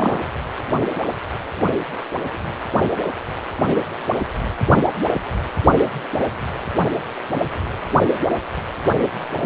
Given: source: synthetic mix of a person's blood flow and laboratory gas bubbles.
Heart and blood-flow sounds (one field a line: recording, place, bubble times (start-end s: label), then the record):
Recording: Doppler ultrasound of blood flow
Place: precordium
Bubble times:
0.00-0.18 s: bubbles
From the record:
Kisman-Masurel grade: 213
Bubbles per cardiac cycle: several, 3 to 8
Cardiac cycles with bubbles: 1 to 10%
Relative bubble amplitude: loud (0.450 to 0.775)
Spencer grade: 1 (occasional bubble signal discernible with the cardiac motion signal, with majority of cardiac periods free of bubbles)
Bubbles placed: anywhere in the cardiac cycle